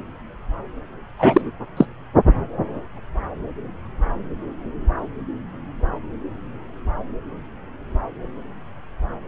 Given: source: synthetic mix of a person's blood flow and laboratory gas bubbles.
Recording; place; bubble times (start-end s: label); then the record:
Doppler ultrasound of blood flow; subclavian vein
1.19-1.51 s: bubbles
1.77-1.85 s: bubbles
From the record:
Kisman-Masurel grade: 213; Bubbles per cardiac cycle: several, 3 to 8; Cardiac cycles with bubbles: 1 to 10%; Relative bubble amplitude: loud (0.450 to 0.775); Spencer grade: 1 (occasional bubble signal discernible with the cardiac motion signal, with majority of cardiac periods free of bubbles); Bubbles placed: anywhere in the cardiac cycle